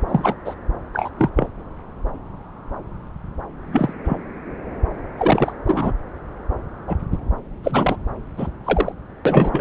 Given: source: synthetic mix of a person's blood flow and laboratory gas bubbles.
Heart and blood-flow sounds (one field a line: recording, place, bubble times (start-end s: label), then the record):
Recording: Doppler ultrasound of blood flow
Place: subclavian vein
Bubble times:
0.08-0.36 s: bubbles
0.45-0.55 s: bubbles
0.93-1.09 s: bubbles
1.18-1.29 s: bubbles
1.35-1.47 s: bubbles
3.72-3.93 s: bubbles
4.04-4.17 s: bubbles
5.17-5.53 s: bubbles
5.67-5.92 s: bubbles
6.87-6.97 s: bubbles
7.12-7.18 s: bubbles
7.62-7.96 s: bubbles
8.37-8.51 s: bubbles
8.64-8.93 s: bubbles
9.25-9.61 s: bubbles
From the record:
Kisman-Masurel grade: 233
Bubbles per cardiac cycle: several, 3 to 8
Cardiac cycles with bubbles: 50 to 99%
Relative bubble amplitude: loud (0.450 to 0.775)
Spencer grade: 3 (all of the cardiac periods contain showers or single bubble signals, but not dominating or overriding the cardiac motion signals)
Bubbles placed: anywhere in the cardiac cycle